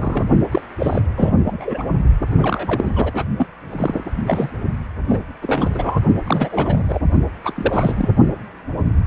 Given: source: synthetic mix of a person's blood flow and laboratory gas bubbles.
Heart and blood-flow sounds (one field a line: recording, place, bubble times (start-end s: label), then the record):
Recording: Doppler ultrasound of blood flow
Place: precordium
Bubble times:
0.00-0.24 s: bubbles
0.51-0.61 s: bubbles
0.79-1.02 s: bubbles
1.16-1.33 s: bubbles
1.45-1.88 s: bubbles
2.38-2.91 s: bubbles
2.96-3.25 s: bubbles
3.38-3.47 s: bubbles
3.72-4.04 s: bubbles
4.27-4.50 s: bubbles
5.08-5.24 s: bubbles
5.42-5.99 s: bubbles
6.24-6.99 s: bubbles
7.42-8.11 s: bubbles
From the record:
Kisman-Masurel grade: 332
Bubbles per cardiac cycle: rolling drumbeat, 9 or more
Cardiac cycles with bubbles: 50 to 99%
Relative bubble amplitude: moderate (0.250 to 0.450)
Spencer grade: 3 (all of the cardiac periods contain showers or single bubble signals, but not dominating or overriding the cardiac motion signals)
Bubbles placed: only in the low amplitude regions of the cardiac cycle